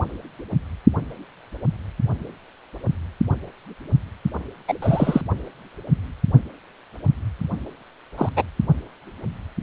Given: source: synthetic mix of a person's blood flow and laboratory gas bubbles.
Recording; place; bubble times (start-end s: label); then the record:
Doppler ultrasound of blood flow; precordium
4.68-4.74 s: bubbles
4.82-5.21 s: bubbles
8.18-8.29 s: bubbles
8.36-8.43 s: bubbles
From the record:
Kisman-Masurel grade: 123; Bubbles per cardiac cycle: 1 to 2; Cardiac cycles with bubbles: 10 to 50%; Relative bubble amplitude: loud (0.450 to 0.775); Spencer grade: 2 (many but less than half of the cardiac periods contain bubble signals, singularly or in groups); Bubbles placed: only in the low amplitude regions of the cardiac cycle